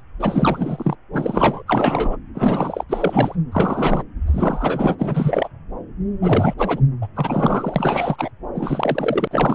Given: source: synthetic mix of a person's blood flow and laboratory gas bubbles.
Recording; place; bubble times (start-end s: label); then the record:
Doppler ultrasound of blood flow; subclavian vein
0.00-0.02 s: bubbles
0.20-0.95 s: bubbles
1.13-1.62 s: bubbles
1.67-2.17 s: bubbles
2.35-2.84 s: bubbles
2.89-3.36 s: bubbles
3.52-4.03 s: bubbles
4.26-5.48 s: bubbles
6.21-6.54 s: bubbles
6.58-6.80 s: bubbles
7.01-7.07 s: bubbles
7.15-8.30 s: bubbles
8.54-9.28 s: bubbles
9.31-9.55 s: bubbles
From the record:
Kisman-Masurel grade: 333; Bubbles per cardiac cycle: rolling drumbeat, 9 or more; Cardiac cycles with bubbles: 50 to 99%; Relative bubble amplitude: loud (0.450 to 0.775); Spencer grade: 3 (all of the cardiac periods contain showers or single bubble signals, but not dominating or overriding the cardiac motion signals); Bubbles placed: anywhere in the cardiac cycle